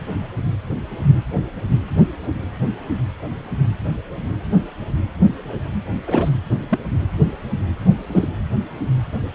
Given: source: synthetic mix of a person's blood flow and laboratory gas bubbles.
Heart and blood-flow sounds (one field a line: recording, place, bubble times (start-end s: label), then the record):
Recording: Doppler ultrasound of blood flow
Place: precordium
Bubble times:
6.07-6.29 s: bubbles
6.51-6.55 s: bubbles
6.69-6.79 s: bubbles
7.96-8.28 s: bubbles
From the record:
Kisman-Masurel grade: 122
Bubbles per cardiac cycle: 1 to 2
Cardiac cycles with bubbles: 10 to 50%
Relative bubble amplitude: moderate (0.250 to 0.450)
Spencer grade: 2 (many but less than half of the cardiac periods contain bubble signals, singularly or in groups)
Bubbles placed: anywhere in the cardiac cycle